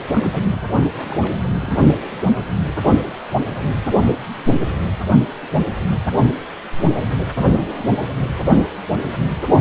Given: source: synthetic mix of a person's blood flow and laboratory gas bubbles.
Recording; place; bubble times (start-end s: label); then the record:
Doppler ultrasound of blood flow; precordium
0.00-0.42 s: bubbles
0.48-0.67 s: bubbles
0.94-1.42 s: bubbles
1.55-1.76 s: bubbles
From the record:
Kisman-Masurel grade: 221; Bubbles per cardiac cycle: several, 3 to 8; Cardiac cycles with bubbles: 10 to 50%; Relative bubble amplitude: barely perceptible (0.100 to 0.250); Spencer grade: 2 (many but less than half of the cardiac periods contain bubble signals, singularly or in groups); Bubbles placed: only in the low amplitude regions of the cardiac cycle